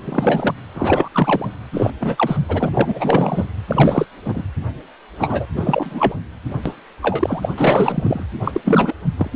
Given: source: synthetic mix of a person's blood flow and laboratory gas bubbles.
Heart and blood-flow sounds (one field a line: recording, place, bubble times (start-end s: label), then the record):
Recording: Doppler ultrasound of blood flow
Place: precordium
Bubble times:
0.04-0.54 s: bubbles
0.74-1.08 s: bubbles
1.11-1.48 s: bubbles
1.73-1.90 s: bubbles
2.00-2.37 s: bubbles
2.48-2.69 s: bubbles
2.74-3.46 s: bubbles
3.67-4.05 s: bubbles
4.25-4.42 s: bubbles
5.18-5.46 s: bubbles
5.56-6.14 s: bubbles
6.66-6.75 s: bubbles
7.02-7.49 s: bubbles
7.57-8.26 s: bubbles
8.44-8.61 s: bubbles
8.65-8.94 s: bubbles
9.17-9.30 s: bubbles
From the record:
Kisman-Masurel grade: 343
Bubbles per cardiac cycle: rolling drumbeat, 9 or more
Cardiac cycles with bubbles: 100%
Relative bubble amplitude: loud (0.450 to 0.775)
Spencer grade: 3 (all of the cardiac periods contain showers or single bubble signals, but not dominating or overriding the cardiac motion signals)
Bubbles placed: anywhere in the cardiac cycle